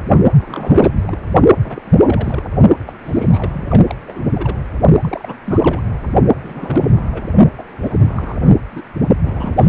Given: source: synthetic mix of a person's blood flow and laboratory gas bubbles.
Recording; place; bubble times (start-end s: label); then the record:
Doppler ultrasound of blood flow; precordium
0.39-0.93 s: bubbles
0.96-1.18 s: bubbles
1.64-1.80 s: bubbles
1.85-2.43 s: bubbles
2.86-2.93 s: bubbles
3.03-3.65 s: bubbles
3.70-3.84 s: bubbles
3.89-3.95 s: bubbles
4.08-4.23 s: bubbles
4.34-4.55 s: bubbles
5.01-5.37 s: bubbles
5.44-5.83 s: bubbles
6.43-7.06 s: bubbles
7.11-7.26 s: bubbles
7.58-8.55 s: bubbles
8.71-8.82 s: bubbles
9.23-9.69 s: bubbles
From the record:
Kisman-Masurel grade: 342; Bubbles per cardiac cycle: rolling drumbeat, 9 or more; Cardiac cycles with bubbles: 100%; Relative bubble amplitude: moderate (0.250 to 0.450); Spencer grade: 3 (all of the cardiac periods contain showers or single bubble signals, but not dominating or overriding the cardiac motion signals); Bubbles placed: only in the low amplitude regions of the cardiac cycle